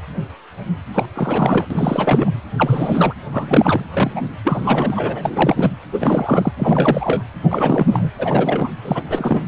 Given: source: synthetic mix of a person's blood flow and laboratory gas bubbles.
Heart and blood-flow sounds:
Doppler ultrasound of blood flow; precordium
0.94-1.06 s: bubbles
1.14-1.65 s: bubbles
1.70-2.31 s: bubbles
2.58-3.15 s: bubbles
3.32-3.85 s: bubbles
3.90-4.30 s: bubbles
4.44-5.76 s: bubbles
5.92-6.52 s: bubbles
6.57-7.22 s: bubbles
7.42-7.87 s: bubbles
7.89-8.11 s: bubbles
8.18-8.71 s: bubbles
8.84-9.03 s: bubbles
9.09-9.41 s: bubbles
From the record:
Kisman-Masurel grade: 332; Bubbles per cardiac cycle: rolling drumbeat, 9 or more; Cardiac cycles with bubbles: 50 to 99%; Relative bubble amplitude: moderate (0.250 to 0.450); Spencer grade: 3 (all of the cardiac periods contain showers or single bubble signals, but not dominating or overriding the cardiac motion signals); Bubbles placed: anywhere in the cardiac cycle

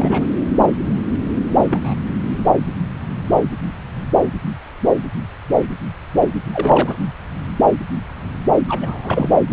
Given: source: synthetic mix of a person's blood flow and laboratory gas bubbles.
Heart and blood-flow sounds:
Doppler ultrasound of blood flow; subclavian vein
0.00-0.24 s: bubbles
1.58-1.94 s: bubbles
6.52-6.97 s: bubbles
8.68-9.30 s: bubbles
9.50-9.53 s: bubbles
From the record:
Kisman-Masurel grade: 222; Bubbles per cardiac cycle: several, 3 to 8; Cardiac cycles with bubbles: 10 to 50%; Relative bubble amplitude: moderate (0.250 to 0.450); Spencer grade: 2 (many but less than half of the cardiac periods contain bubble signals, singularly or in groups); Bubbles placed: anywhere in the cardiac cycle

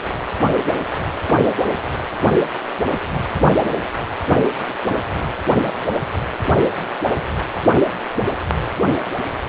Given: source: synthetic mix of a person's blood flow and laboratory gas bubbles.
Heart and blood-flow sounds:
Doppler ultrasound of blood flow; precordium
no bubbles
From the record:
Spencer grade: 0 (complete lack of bubble signals)

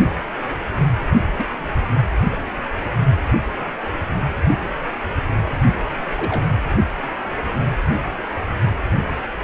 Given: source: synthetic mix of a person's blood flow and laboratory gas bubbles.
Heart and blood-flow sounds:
Doppler ultrasound of blood flow; precordium
1.36-1.46 s: bubbles
2.31-2.40 s: bubbles
6.17-6.46 s: bubbles
From the record:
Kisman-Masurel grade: 121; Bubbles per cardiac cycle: 1 to 2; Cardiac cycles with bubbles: 10 to 50%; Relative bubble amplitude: barely perceptible (0.100 to 0.250); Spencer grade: 2 (many but less than half of the cardiac periods contain bubble signals, singularly or in groups); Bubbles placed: only in the low amplitude regions of the cardiac cycle

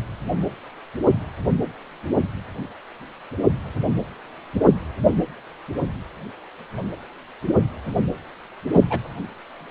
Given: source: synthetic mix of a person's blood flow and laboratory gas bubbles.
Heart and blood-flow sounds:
Doppler ultrasound of blood flow; precordium
8.73-8.82 s: bubbles
8.89-9.00 s: bubbles
From the record:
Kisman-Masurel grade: 112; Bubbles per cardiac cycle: 1 to 2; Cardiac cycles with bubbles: 1 to 10%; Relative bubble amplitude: moderate (0.250 to 0.450); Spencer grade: 1 (occasional bubble signal discernible with the cardiac motion signal, with majority of cardiac periods free of bubbles); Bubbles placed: anywhere in the cardiac cycle

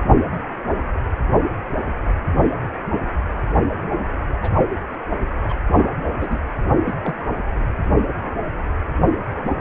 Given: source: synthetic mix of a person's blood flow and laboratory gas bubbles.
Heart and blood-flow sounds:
Doppler ultrasound of blood flow; precordium
4.42-4.51 s: bubbles
5.49-5.54 s: bubbles
6.19-6.38 s: bubbles
6.86-6.95 s: bubbles
7.03-7.22 s: bubbles
From the record:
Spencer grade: 2 (many but less than half of the cardiac periods contain bubble signals, singularly or in groups); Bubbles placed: only in the low amplitude regions of the cardiac cycle

